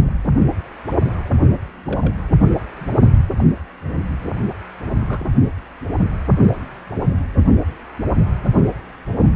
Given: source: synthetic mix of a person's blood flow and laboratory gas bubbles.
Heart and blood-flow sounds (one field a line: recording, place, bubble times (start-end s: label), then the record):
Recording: Doppler ultrasound of blood flow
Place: precordium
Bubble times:
0.04-0.13 s: bubbles
1.86-2.13 s: bubbles
2.77-2.85 s: bubbles
3.36-3.44 s: bubbles
4.99-5.29 s: bubbles
From the record:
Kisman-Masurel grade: 121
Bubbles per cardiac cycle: 1 to 2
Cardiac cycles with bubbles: 10 to 50%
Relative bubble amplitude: barely perceptible (0.100 to 0.250)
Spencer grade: 2 (many but less than half of the cardiac periods contain bubble signals, singularly or in groups)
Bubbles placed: only in the low amplitude regions of the cardiac cycle